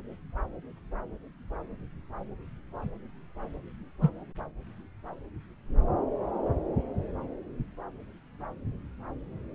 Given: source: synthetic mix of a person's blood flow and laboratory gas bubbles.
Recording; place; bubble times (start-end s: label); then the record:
Doppler ultrasound of blood flow; subclavian vein
4.02-4.10 s: bubbles
From the record:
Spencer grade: 1 (occasional bubble signal discernible with the cardiac motion signal, with majority of cardiac periods free of bubbles); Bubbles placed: anywhere in the cardiac cycle